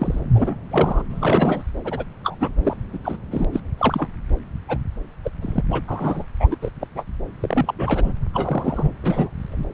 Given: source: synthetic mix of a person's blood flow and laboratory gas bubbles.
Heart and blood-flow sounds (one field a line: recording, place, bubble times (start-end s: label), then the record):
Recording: Doppler ultrasound of blood flow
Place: subclavian vein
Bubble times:
0.00-0.20 s: bubbles
0.35-0.56 s: bubbles
0.71-1.03 s: bubbles
1.09-1.64 s: bubbles
1.85-2.04 s: bubbles
2.23-2.37 s: bubbles
2.41-2.52 s: bubbles
2.64-2.77 s: bubbles
2.93-2.98 s: bubbles
3.04-3.17 s: bubbles
3.31-3.45 s: bubbles
3.53-3.60 s: bubbles
3.77-4.08 s: bubbles
4.68-4.78 s: bubbles
5.24-5.31 s: bubbles
5.42-5.61 s: bubbles
5.70-5.82 s: bubbles
5.88-6.24 s: bubbles
6.40-6.48 s: bubbles
6.50-6.55 s: bubbles
6.62-6.71 s: bubbles
6.80-6.87 s: bubbles
6.95-7.04 s: bubbles
7.41-7.74 s: bubbles
7.79-8.12 s: bubbles
8.33-8.91 s: bubbles
9.02-9.29 s: bubbles
9.51-9.64 s: bubbles
From the record:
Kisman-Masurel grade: 232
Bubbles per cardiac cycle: several, 3 to 8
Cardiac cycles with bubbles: 50 to 99%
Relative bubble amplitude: moderate (0.250 to 0.450)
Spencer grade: 3 (all of the cardiac periods contain showers or single bubble signals, but not dominating or overriding the cardiac motion signals)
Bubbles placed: anywhere in the cardiac cycle